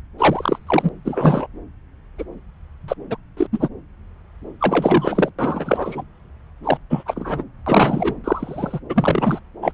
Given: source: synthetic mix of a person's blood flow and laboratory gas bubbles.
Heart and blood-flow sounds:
Doppler ultrasound of blood flow; subclavian vein
0.18-0.59 s: bubbles
0.67-0.89 s: bubbles
1.04-1.46 s: bubbles
2.18-2.24 s: bubbles
2.88-2.94 s: bubbles
3.10-3.17 s: bubbles
3.37-3.47 s: bubbles
3.53-3.69 s: bubbles
4.61-5.29 s: bubbles
5.38-6.04 s: bubbles
6.63-6.78 s: bubbles
6.90-7.03 s: bubbles
7.05-7.44 s: bubbles
7.66-8.14 s: bubbles
8.24-8.79 s: bubbles
8.89-9.39 s: bubbles
9.62-9.74 s: bubbles
From the record:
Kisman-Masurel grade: 243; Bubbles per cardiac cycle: several, 3 to 8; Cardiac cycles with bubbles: 100%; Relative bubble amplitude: loud (0.450 to 0.775); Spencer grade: 3 (all of the cardiac periods contain showers or single bubble signals, but not dominating or overriding the cardiac motion signals); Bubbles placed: anywhere in the cardiac cycle

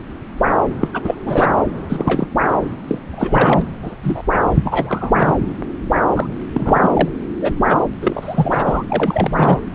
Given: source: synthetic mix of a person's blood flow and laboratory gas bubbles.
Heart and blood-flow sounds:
Doppler ultrasound of blood flow; subclavian vein
0.80-0.88 s: bubbles
0.93-1.15 s: bubbles
1.25-1.53 s: bubbles
1.89-2.27 s: bubbles
2.88-2.99 s: bubbles
3.13-3.66 s: bubbles
3.81-3.96 s: bubbles
4.03-4.23 s: bubbles
4.55-5.33 s: bubbles
6.11-6.27 s: bubbles
6.54-7.08 s: bubbles
7.21-7.24 s: bubbles
7.41-7.54 s: bubbles
7.68-7.78 s: bubbles
8.01-8.83 s: bubbles
8.88-9.59 s: bubbles
9.72-9.75 s: bubbles
From the record:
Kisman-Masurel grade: 233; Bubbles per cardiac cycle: several, 3 to 8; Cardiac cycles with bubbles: 50 to 99%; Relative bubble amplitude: loud (0.450 to 0.775); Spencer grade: 3 (all of the cardiac periods contain showers or single bubble signals, but not dominating or overriding the cardiac motion signals); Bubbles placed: anywhere in the cardiac cycle

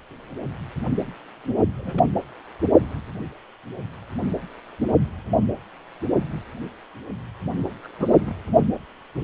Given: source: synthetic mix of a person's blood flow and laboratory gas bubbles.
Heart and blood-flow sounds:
Doppler ultrasound of blood flow; precordium
1.77-2.04 s: bubbles
7.83-7.88 s: bubbles
7.98-8.34 s: bubbles
From the record:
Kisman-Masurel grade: 221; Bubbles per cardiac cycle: several, 3 to 8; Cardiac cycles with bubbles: 10 to 50%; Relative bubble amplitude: barely perceptible (0.100 to 0.250); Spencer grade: 2 (many but less than half of the cardiac periods contain bubble signals, singularly or in groups); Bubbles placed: only in the low amplitude regions of the cardiac cycle

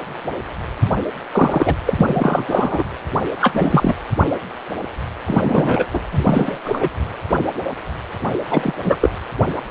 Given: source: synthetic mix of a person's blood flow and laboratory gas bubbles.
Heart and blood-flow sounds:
Doppler ultrasound of blood flow; precordium
1.31-1.75 s: bubbles
1.85-2.84 s: bubbles
3.41-3.95 s: bubbles
5.27-5.86 s: bubbles
5.93-6.00 s: bubbles
6.11-6.60 s: bubbles
6.65-6.89 s: bubbles
8.51-8.72 s: bubbles
8.85-8.97 s: bubbles
9.00-9.10 s: bubbles
From the record:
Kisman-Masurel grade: 223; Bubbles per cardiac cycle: several, 3 to 8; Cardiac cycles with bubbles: 10 to 50%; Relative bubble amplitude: loud (0.450 to 0.775); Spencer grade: 2 (many but less than half of the cardiac periods contain bubble signals, singularly or in groups); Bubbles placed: anywhere in the cardiac cycle

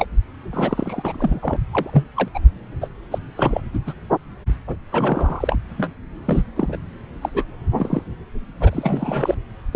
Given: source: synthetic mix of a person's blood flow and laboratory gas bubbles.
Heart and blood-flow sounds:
Doppler ultrasound of blood flow; subclavian vein
0.00-0.06 s: bubbles
0.53-1.57 s: bubbles
1.72-1.90 s: bubbles
1.93-2.06 s: bubbles
2.15-2.29 s: bubbles
2.34-2.40 s: bubbles
2.81-2.88 s: bubbles
3.12-3.19 s: bubbles
3.35-3.61 s: bubbles
3.73-3.79 s: bubbles
3.87-3.94 s: bubbles
4.67-4.76 s: bubbles
4.92-5.59 s: bubbles
5.78-5.92 s: bubbles
6.25-6.43 s: bubbles
6.56-6.76 s: bubbles
7.21-7.45 s: bubbles
7.76-8.03 s: bubbles
8.60-9.35 s: bubbles
9.72-9.76 s: bubbles
From the record:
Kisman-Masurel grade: 242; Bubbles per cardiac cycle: several, 3 to 8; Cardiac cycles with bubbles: 100%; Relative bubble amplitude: moderate (0.250 to 0.450); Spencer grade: 3 (all of the cardiac periods contain showers or single bubble signals, but not dominating or overriding the cardiac motion signals); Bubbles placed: anywhere in the cardiac cycle

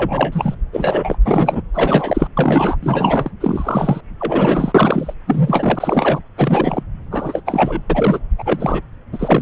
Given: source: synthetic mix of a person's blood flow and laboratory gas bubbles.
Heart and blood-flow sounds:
Doppler ultrasound of blood flow; subclavian vein
0.00-0.56 s: bubbles
0.72-1.18 s: bubbles
1.25-1.62 s: bubbles
1.74-2.28 s: bubbles
2.36-2.76 s: bubbles
2.82-3.30 s: bubbles
3.40-4.00 s: bubbles
4.20-5.14 s: bubbles
5.27-6.20 s: bubbles
6.37-6.83 s: bubbles
7.11-7.41 s: bubbles
7.46-7.81 s: bubbles
7.89-8.20 s: bubbles
8.38-8.81 s: bubbles
9.12-9.42 s: bubbles
From the record:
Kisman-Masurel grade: 343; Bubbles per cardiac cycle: rolling drumbeat, 9 or more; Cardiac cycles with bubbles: 100%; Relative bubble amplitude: loud (0.450 to 0.775); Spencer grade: 3 (all of the cardiac periods contain showers or single bubble signals, but not dominating or overriding the cardiac motion signals); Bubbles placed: anywhere in the cardiac cycle

